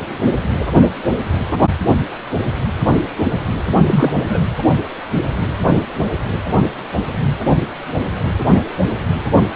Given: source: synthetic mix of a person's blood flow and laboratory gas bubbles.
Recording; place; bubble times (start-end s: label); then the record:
Doppler ultrasound of blood flow; precordium
3.86-4.39 s: bubbles
From the record:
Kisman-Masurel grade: 212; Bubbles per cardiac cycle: several, 3 to 8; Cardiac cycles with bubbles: 1 to 10%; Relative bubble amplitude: moderate (0.250 to 0.450); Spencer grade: 1 (occasional bubble signal discernible with the cardiac motion signal, with majority of cardiac periods free of bubbles); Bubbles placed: anywhere in the cardiac cycle